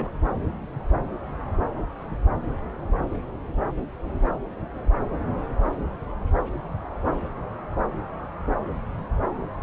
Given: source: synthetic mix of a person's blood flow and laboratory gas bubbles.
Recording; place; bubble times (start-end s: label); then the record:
Doppler ultrasound of blood flow; subclavian vein
0.00-0.10 s: bubbles
From the record:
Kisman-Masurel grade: 111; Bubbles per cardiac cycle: 1 to 2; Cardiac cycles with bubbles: 1 to 10%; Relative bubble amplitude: barely perceptible (0.100 to 0.250); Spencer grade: 1 (occasional bubble signal discernible with the cardiac motion signal, with majority of cardiac periods free of bubbles); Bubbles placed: anywhere in the cardiac cycle